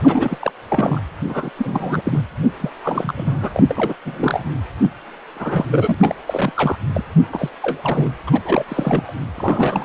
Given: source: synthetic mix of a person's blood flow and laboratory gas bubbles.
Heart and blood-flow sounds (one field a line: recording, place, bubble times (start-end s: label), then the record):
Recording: Doppler ultrasound of blood flow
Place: precordium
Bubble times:
0.03-0.52 s: bubbles
0.69-1.02 s: bubbles
1.28-1.50 s: bubbles
1.57-2.02 s: bubbles
2.04-2.24 s: bubbles
2.42-2.47 s: bubbles
2.60-2.71 s: bubbles
2.83-3.50 s: bubbles
3.54-3.94 s: bubbles
4.04-4.45 s: bubbles
4.82-4.91 s: bubbles
5.35-5.66 s: bubbles
5.72-5.95 s: bubbles
6.00-6.15 s: bubbles
6.27-6.53 s: bubbles
6.56-6.76 s: bubbles
6.94-7.04 s: bubbles
7.32-7.50 s: bubbles
7.62-7.79 s: bubbles
7.83-8.10 s: bubbles
8.26-8.41 s: bubbles
8.45-8.65 s: bubbles
8.68-9.13 s: bubbles
9.34-9.85 s: bubbles
From the record:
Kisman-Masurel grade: 342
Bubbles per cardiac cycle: rolling drumbeat, 9 or more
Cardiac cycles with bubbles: 100%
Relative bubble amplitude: moderate (0.250 to 0.450)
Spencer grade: 3 (all of the cardiac periods contain showers or single bubble signals, but not dominating or overriding the cardiac motion signals)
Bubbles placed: anywhere in the cardiac cycle